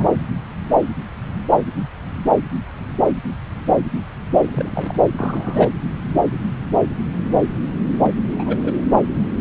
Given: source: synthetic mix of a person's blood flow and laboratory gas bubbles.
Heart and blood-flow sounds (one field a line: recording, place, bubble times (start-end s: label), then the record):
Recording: Doppler ultrasound of blood flow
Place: subclavian vein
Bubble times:
0.00-0.06 s: bubbles
4.46-4.97 s: bubbles
5.17-5.71 s: bubbles
8.03-8.13 s: bubbles
8.36-8.74 s: bubbles
From the record:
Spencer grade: 2 (many but less than half of the cardiac periods contain bubble signals, singularly or in groups)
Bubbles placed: anywhere in the cardiac cycle